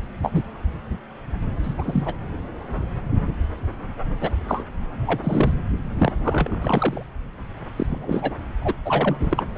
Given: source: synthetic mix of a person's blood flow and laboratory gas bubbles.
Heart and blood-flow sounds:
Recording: Doppler ultrasound of blood flow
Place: subclavian vein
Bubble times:
0.22-0.43 s: bubbles
1.63-1.75 s: bubbles
1.77-2.13 s: bubbles
4.21-4.29 s: bubbles
4.48-4.64 s: bubbles
5.07-5.21 s: bubbles
5.23-5.52 s: bubbles
5.98-6.12 s: bubbles
6.23-7.05 s: bubbles
7.76-8.36 s: bubbles
8.61-8.74 s: bubbles
8.85-9.43 s: bubbles
From the record:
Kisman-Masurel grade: 232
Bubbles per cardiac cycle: several, 3 to 8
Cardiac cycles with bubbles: 50 to 99%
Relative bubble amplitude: moderate (0.250 to 0.450)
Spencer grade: 3 (all of the cardiac periods contain showers or single bubble signals, but not dominating or overriding the cardiac motion signals)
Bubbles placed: anywhere in the cardiac cycle

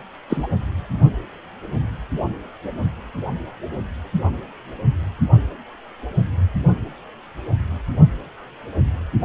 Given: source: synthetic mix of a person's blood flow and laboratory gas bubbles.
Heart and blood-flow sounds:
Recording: Doppler ultrasound of blood flow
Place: precordium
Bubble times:
0.29-0.47 s: bubbles
From the record:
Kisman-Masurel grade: 223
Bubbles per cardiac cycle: several, 3 to 8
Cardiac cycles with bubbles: 10 to 50%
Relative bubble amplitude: loud (0.450 to 0.775)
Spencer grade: 2 (many but less than half of the cardiac periods contain bubble signals, singularly or in groups)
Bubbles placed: anywhere in the cardiac cycle

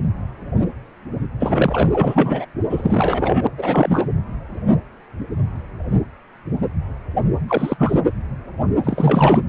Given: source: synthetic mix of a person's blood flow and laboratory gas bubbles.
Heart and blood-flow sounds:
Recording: Doppler ultrasound of blood flow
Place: precordium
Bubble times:
1.40-1.89 s: bubbles
1.92-2.45 s: bubbles
2.69-3.47 s: bubbles
3.57-4.07 s: bubbles
7.48-8.00 s: bubbles
8.83-9.39 s: bubbles
From the record:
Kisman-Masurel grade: 333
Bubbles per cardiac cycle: rolling drumbeat, 9 or more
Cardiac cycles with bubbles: 50 to 99%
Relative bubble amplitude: loud (0.450 to 0.775)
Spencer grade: 3 (all of the cardiac periods contain showers or single bubble signals, but not dominating or overriding the cardiac motion signals)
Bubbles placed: anywhere in the cardiac cycle

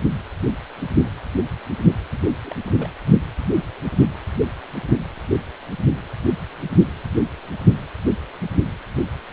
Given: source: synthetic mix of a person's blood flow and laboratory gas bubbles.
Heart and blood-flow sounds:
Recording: Doppler ultrasound of blood flow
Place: precordium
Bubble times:
2.44-2.54 s: bubbles
2.65-2.72 s: bubbles
2.77-2.89 s: bubbles
From the record:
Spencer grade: 1 (occasional bubble signal discernible with the cardiac motion signal, with majority of cardiac periods free of bubbles)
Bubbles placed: anywhere in the cardiac cycle

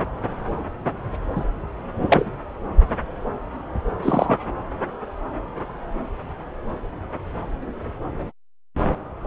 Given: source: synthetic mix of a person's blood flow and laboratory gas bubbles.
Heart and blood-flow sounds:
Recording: Doppler ultrasound of blood flow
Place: subclavian vein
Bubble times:
1.36-1.45 s: bubbles
2.09-2.30 s: bubbles
4.02-4.38 s: bubbles
From the record:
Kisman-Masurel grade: 113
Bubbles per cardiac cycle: 1 to 2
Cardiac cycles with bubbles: 1 to 10%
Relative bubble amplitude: loud (0.450 to 0.775)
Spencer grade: 1 (occasional bubble signal discernible with the cardiac motion signal, with majority of cardiac periods free of bubbles)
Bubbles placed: anywhere in the cardiac cycle

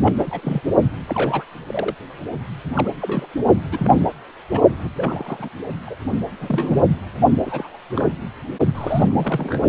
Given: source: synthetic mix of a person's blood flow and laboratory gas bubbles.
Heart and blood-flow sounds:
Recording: Doppler ultrasound of blood flow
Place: precordium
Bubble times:
0.00-0.61 s: bubbles
1.08-1.43 s: bubbles
1.67-1.95 s: bubbles
2.75-2.90 s: bubbles
3.02-3.27 s: bubbles
3.71-4.09 s: bubbles
4.51-4.61 s: bubbles
4.79-4.88 s: bubbles
4.96-5.49 s: bubbles
5.86-5.95 s: bubbles
6.41-6.84 s: bubbles
7.45-7.76 s: bubbles
7.96-8.10 s: bubbles
8.74-9.62 s: bubbles
From the record:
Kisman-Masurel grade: 232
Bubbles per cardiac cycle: several, 3 to 8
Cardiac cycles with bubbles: 50 to 99%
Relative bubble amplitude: moderate (0.250 to 0.450)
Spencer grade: 3 (all of the cardiac periods contain showers or single bubble signals, but not dominating or overriding the cardiac motion signals)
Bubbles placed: only in the low amplitude regions of the cardiac cycle

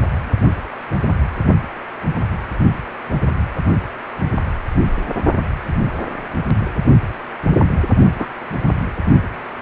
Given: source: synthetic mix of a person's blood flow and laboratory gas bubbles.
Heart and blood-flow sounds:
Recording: Doppler ultrasound of blood flow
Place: precordium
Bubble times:
8.19-8.26 s: bubbles
From the record:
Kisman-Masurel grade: 122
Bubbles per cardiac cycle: 1 to 2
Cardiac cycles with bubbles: 10 to 50%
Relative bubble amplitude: moderate (0.250 to 0.450)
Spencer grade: 2 (many but less than half of the cardiac periods contain bubble signals, singularly or in groups)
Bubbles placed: only in the low amplitude regions of the cardiac cycle

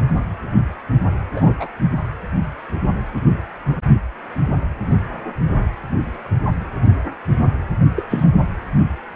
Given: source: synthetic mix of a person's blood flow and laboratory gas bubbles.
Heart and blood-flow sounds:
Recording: Doppler ultrasound of blood flow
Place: precordium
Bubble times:
1.36-1.54 s: bubbles
1.60-1.67 s: bubbles
7.97-8.04 s: bubbles
8.09-8.30 s: bubbles
From the record:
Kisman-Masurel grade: 222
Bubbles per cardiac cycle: several, 3 to 8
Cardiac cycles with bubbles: 10 to 50%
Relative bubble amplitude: moderate (0.250 to 0.450)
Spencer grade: 2 (many but less than half of the cardiac periods contain bubble signals, singularly or in groups)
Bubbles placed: only in the low amplitude regions of the cardiac cycle

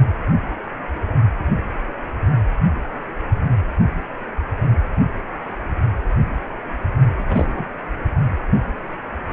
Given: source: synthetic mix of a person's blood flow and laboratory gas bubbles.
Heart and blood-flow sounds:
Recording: Doppler ultrasound of blood flow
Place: precordium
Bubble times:
7.17-7.66 s: bubbles
From the record:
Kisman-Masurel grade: 112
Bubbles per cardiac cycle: 1 to 2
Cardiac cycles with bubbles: 1 to 10%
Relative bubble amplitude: moderate (0.250 to 0.450)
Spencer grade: 1 (occasional bubble signal discernible with the cardiac motion signal, with majority of cardiac periods free of bubbles)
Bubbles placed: only in the low amplitude regions of the cardiac cycle

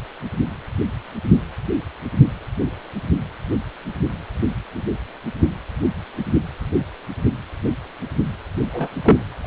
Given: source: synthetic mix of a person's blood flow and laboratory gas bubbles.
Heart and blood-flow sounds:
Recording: Doppler ultrasound of blood flow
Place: precordium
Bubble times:
8.61-8.90 s: bubbles
9.04-9.16 s: bubbles
9.43-9.46 s: bubbles
From the record:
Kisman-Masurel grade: 222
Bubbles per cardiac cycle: several, 3 to 8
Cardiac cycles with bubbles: 10 to 50%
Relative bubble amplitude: moderate (0.250 to 0.450)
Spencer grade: 2 (many but less than half of the cardiac periods contain bubble signals, singularly or in groups)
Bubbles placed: anywhere in the cardiac cycle

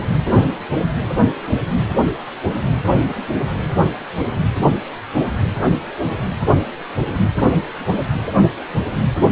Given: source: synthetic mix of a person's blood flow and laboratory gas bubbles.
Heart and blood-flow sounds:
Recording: Doppler ultrasound of blood flow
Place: precordium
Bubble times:
no bubbles
From the record:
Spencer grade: 0 (complete lack of bubble signals)

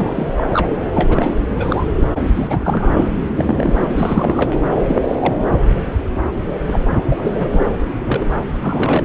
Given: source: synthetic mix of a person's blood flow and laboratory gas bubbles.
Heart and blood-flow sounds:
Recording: Doppler ultrasound of blood flow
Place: subclavian vein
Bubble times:
0.00-0.33 s: bubbles
0.37-0.69 s: bubbles
0.94-1.46 s: bubbles
1.59-1.85 s: bubbles
1.99-2.08 s: bubbles
2.34-2.92 s: bubbles
2.94-3.10 s: bubbles
3.28-3.74 s: bubbles
3.80-3.87 s: bubbles
3.94-4.59 s: bubbles
4.85-4.96 s: bubbles
5.01-5.17 s: bubbles
5.19-5.48 s: bubbles
6.65-6.79 s: bubbles
6.88-7.00 s: bubbles
7.05-7.66 s: bubbles
8.07-8.25 s: bubbles
8.61-9.05 s: bubbles
From the record:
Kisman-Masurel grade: 332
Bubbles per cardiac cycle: rolling drumbeat, 9 or more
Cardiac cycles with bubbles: 50 to 99%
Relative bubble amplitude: moderate (0.250 to 0.450)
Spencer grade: 3 (all of the cardiac periods contain showers or single bubble signals, but not dominating or overriding the cardiac motion signals)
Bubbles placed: anywhere in the cardiac cycle

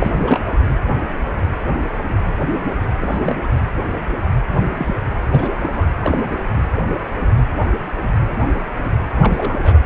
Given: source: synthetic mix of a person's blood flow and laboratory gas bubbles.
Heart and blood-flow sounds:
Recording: Doppler ultrasound of blood flow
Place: precordium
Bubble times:
0.00-0.12 s: bubbles
0.18-0.51 s: bubbles
3.02-3.36 s: bubbles
3.43-3.48 s: bubbles
4.47-4.71 s: bubbles
4.77-4.96 s: bubbles
5.31-5.50 s: bubbles
5.61-5.70 s: bubbles
5.74-5.88 s: bubbles
6.02-6.38 s: bubbles
9.15-9.60 s: bubbles
9.62-9.79 s: bubbles
From the record:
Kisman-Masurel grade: 222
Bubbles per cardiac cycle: several, 3 to 8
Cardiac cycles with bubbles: 10 to 50%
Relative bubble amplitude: moderate (0.250 to 0.450)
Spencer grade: 2 (many but less than half of the cardiac periods contain bubble signals, singularly or in groups)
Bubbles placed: anywhere in the cardiac cycle

